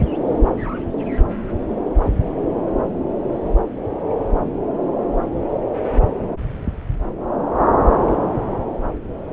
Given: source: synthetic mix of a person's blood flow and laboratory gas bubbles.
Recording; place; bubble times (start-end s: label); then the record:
Doppler ultrasound of blood flow; subclavian vein
no bubbles
From the record:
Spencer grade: 0 (complete lack of bubble signals)